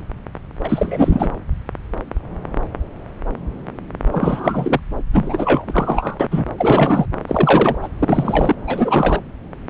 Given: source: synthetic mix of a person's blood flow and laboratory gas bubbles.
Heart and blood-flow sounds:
Doppler ultrasound of blood flow; subclavian vein
0.64-1.30 s: bubbles
4.12-4.80 s: bubbles
5.12-6.28 s: bubbles
6.31-6.45 s: bubbles
6.58-7.07 s: bubbles
7.27-7.76 s: bubbles
7.82-7.88 s: bubbles
7.99-8.55 s: bubbles
8.67-9.20 s: bubbles
From the record:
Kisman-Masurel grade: 333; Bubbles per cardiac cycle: rolling drumbeat, 9 or more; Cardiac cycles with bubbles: 50 to 99%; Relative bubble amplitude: loud (0.450 to 0.775); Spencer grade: 3 (all of the cardiac periods contain showers or single bubble signals, but not dominating or overriding the cardiac motion signals); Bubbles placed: anywhere in the cardiac cycle

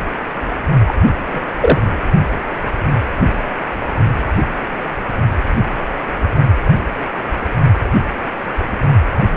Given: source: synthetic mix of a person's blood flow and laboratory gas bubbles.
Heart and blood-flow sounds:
Doppler ultrasound of blood flow; precordium
0.86-0.94 s: bubbles
1.27-1.43 s: bubbles
1.60-1.80 s: bubbles
From the record:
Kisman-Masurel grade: 223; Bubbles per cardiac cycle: several, 3 to 8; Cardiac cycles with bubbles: 10 to 50%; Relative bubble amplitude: loud (0.450 to 0.775); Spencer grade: 2 (many but less than half of the cardiac periods contain bubble signals, singularly or in groups); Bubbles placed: only in the low amplitude regions of the cardiac cycle

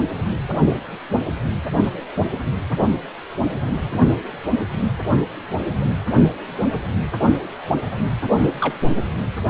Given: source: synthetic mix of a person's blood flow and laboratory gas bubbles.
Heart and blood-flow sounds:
Doppler ultrasound of blood flow; precordium
1.84-1.90 s: bubbles
2.17-2.26 s: bubbles
8.37-8.50 s: bubbles
8.60-8.74 s: bubbles
From the record:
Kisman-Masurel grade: 122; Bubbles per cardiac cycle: 1 to 2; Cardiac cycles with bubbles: 10 to 50%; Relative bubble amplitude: moderate (0.250 to 0.450); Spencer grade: 2 (many but less than half of the cardiac periods contain bubble signals, singularly or in groups); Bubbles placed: anywhere in the cardiac cycle

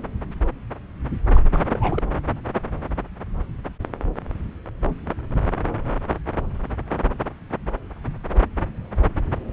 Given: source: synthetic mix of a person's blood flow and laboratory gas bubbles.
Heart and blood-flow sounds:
Doppler ultrasound of blood flow; subclavian vein
1.33-1.41 s: bubbles
1.54-1.59 s: bubbles
1.69-2.02 s: bubbles
From the record:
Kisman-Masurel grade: 211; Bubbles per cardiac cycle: several, 3 to 8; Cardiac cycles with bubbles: 1 to 10%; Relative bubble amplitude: barely perceptible (0.100 to 0.250); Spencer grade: 1 (occasional bubble signal discernible with the cardiac motion signal, with majority of cardiac periods free of bubbles); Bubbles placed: anywhere in the cardiac cycle

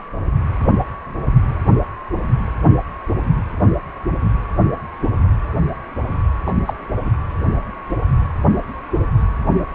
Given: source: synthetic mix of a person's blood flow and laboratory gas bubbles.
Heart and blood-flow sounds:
Doppler ultrasound of blood flow; precordium
6.45-6.54 s: bubbles
6.66-6.74 s: bubbles
7.05-7.11 s: bubbles
From the record:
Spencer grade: 1 (occasional bubble signal discernible with the cardiac motion signal, with majority of cardiac periods free of bubbles); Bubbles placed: anywhere in the cardiac cycle

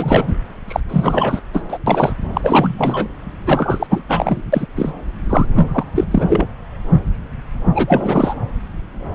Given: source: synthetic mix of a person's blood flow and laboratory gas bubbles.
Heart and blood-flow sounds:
Doppler ultrasound of blood flow; subclavian vein
0.00-0.35 s: bubbles
0.68-0.80 s: bubbles
0.89-1.41 s: bubbles
1.54-1.63 s: bubbles
1.68-1.78 s: bubbles
1.86-2.12 s: bubbles
2.33-3.07 s: bubbles
3.46-3.87 s: bubbles
3.89-4.03 s: bubbles
4.08-4.42 s: bubbles
4.52-4.67 s: bubbles
4.75-4.92 s: bubbles
5.29-5.46 s: bubbles
5.56-5.84 s: bubbles
5.95-6.04 s: bubbles
6.10-6.46 s: bubbles
7.75-8.34 s: bubbles
From the record:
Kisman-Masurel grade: 333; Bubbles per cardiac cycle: rolling drumbeat, 9 or more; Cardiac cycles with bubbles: 50 to 99%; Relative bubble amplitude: loud (0.450 to 0.775); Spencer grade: 3 (all of the cardiac periods contain showers or single bubble signals, but not dominating or overriding the cardiac motion signals); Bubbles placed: anywhere in the cardiac cycle

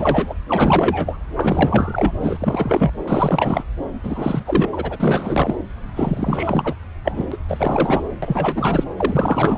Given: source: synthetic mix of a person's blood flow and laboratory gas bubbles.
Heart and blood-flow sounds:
Doppler ultrasound of blood flow; subclavian vein
0.00-0.35 s: bubbles
0.48-1.21 s: bubbles
1.35-2.15 s: bubbles
2.21-2.92 s: bubbles
3.06-3.64 s: bubbles
4.03-5.55 s: bubbles
5.96-6.74 s: bubbles
7.04-7.37 s: bubbles
7.48-8.03 s: bubbles
8.22-8.84 s: bubbles
8.96-9.58 s: bubbles
From the record:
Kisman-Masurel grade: 444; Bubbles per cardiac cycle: continuous sound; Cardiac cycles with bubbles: 100%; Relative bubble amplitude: maximal (0.775 to 0.999); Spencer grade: 4 (maximum detectable bubble signal sounding continuously throughout systole and diastole of every cardiac period, and overriding the amplitude of the normal cardiac signals); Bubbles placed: anywhere in the cardiac cycle

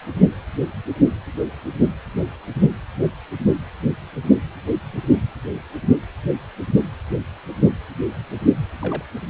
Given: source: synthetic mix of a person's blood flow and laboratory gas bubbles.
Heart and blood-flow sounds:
Doppler ultrasound of blood flow; precordium
8.81-9.04 s: bubbles
From the record:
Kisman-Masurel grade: 111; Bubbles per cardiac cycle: 1 to 2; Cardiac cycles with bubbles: 1 to 10%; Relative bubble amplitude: barely perceptible (0.100 to 0.250); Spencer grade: 1 (occasional bubble signal discernible with the cardiac motion signal, with majority of cardiac periods free of bubbles); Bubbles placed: anywhere in the cardiac cycle

